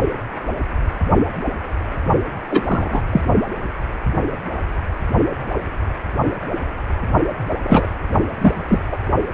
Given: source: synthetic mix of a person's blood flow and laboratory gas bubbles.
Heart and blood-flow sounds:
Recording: Doppler ultrasound of blood flow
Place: precordium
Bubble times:
2.48-3.03 s: bubbles
3.12-3.21 s: bubbles
7.63-7.89 s: bubbles
8.41-8.84 s: bubbles
8.92-8.97 s: bubbles
From the record:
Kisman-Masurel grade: 223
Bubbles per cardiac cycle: several, 3 to 8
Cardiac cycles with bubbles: 10 to 50%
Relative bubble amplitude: loud (0.450 to 0.775)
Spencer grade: 2 (many but less than half of the cardiac periods contain bubble signals, singularly or in groups)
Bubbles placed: only in the low amplitude regions of the cardiac cycle

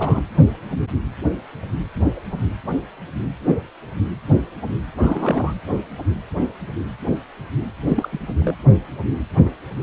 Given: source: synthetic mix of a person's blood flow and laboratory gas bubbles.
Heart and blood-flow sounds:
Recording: Doppler ultrasound of blood flow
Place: precordium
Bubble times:
0.00-0.22 s: bubbles
5.00-5.54 s: bubbles
7.87-8.19 s: bubbles
8.41-8.54 s: bubbles
From the record:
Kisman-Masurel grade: 222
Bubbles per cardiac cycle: several, 3 to 8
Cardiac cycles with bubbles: 10 to 50%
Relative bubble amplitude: moderate (0.250 to 0.450)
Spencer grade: 2 (many but less than half of the cardiac periods contain bubble signals, singularly or in groups)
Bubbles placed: anywhere in the cardiac cycle

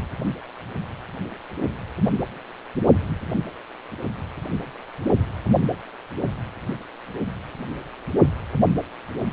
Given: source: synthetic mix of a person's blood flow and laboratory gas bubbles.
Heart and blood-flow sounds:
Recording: Doppler ultrasound of blood flow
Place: precordium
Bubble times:
no bubbles
From the record:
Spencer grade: 0 (complete lack of bubble signals)

